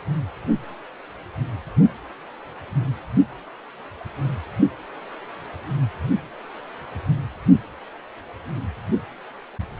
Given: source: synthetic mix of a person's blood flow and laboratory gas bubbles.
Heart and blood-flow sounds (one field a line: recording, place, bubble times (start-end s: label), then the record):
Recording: Doppler ultrasound of blood flow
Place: precordium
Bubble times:
no bubbles
From the record:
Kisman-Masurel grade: 000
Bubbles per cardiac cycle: 0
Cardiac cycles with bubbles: 0%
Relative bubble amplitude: no bubbles discernible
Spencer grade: 0 (complete lack of bubble signals)